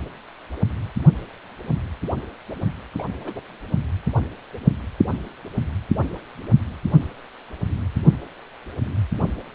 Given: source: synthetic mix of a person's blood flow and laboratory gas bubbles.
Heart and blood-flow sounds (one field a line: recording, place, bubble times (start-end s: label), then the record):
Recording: Doppler ultrasound of blood flow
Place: precordium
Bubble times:
2.98-3.04 s: bubbles
3.18-3.42 s: bubbles
From the record:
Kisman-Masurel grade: 211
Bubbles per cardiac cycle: several, 3 to 8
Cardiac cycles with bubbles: 1 to 10%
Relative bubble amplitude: barely perceptible (0.100 to 0.250)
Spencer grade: 1 (occasional bubble signal discernible with the cardiac motion signal, with majority of cardiac periods free of bubbles)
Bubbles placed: only in the low amplitude regions of the cardiac cycle